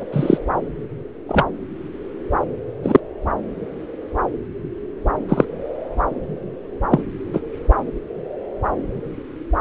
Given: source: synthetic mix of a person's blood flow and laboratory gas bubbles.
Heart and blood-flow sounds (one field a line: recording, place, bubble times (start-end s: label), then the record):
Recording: Doppler ultrasound of blood flow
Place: subclavian vein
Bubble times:
0.00-0.04 s: bubbles
0.12-0.38 s: bubbles
1.29-1.44 s: bubbles
2.83-3.00 s: bubbles
5.29-5.45 s: bubbles
6.90-7.03 s: bubbles
7.33-7.40 s: bubbles
From the record:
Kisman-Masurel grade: 123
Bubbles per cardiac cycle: 1 to 2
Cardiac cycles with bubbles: 10 to 50%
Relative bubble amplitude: loud (0.450 to 0.775)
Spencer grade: 2 (many but less than half of the cardiac periods contain bubble signals, singularly or in groups)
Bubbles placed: anywhere in the cardiac cycle